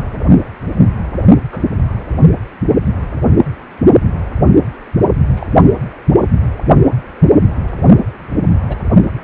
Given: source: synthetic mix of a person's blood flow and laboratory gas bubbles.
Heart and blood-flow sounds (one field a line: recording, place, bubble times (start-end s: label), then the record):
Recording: Doppler ultrasound of blood flow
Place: precordium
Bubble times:
1.51-1.75 s: bubbles
5.35-5.47 s: bubbles
8.68-8.77 s: bubbles
From the record:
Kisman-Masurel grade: 121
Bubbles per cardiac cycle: 1 to 2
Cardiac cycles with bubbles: 10 to 50%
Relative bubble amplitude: barely perceptible (0.100 to 0.250)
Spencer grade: 2 (many but less than half of the cardiac periods contain bubble signals, singularly or in groups)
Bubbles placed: only in the low amplitude regions of the cardiac cycle